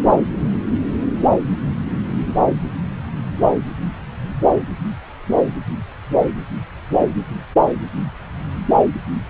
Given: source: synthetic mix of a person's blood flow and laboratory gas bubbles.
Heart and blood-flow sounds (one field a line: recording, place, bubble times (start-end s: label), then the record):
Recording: Doppler ultrasound of blood flow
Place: subclavian vein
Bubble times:
no bubbles
From the record:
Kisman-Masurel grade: 000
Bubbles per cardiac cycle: 0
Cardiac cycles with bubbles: 0%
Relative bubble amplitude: no bubbles discernible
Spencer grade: 0 (complete lack of bubble signals)